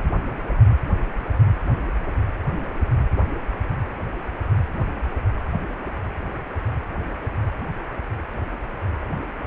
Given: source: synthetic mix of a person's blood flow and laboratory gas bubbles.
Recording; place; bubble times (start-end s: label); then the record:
Doppler ultrasound of blood flow; precordium
no bubbles
From the record:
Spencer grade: 0 (complete lack of bubble signals)